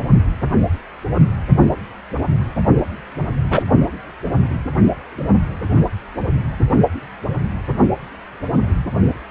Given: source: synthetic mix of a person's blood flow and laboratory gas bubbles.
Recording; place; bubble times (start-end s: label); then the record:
Doppler ultrasound of blood flow; precordium
3.51-3.63 s: bubbles
From the record:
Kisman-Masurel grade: 123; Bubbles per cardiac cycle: 1 to 2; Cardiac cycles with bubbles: 10 to 50%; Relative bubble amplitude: loud (0.450 to 0.775); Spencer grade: 2 (many but less than half of the cardiac periods contain bubble signals, singularly or in groups); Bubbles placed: only in the low amplitude regions of the cardiac cycle